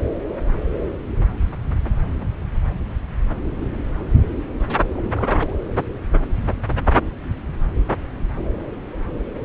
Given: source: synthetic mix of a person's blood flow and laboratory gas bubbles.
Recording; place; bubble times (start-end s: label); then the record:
Doppler ultrasound of blood flow; subclavian vein
4.93-5.56 s: bubbles
From the record:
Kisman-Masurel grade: 211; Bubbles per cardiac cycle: several, 3 to 8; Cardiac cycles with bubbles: 1 to 10%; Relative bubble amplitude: barely perceptible (0.100 to 0.250); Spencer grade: 1 (occasional bubble signal discernible with the cardiac motion signal, with majority of cardiac periods free of bubbles); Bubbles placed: anywhere in the cardiac cycle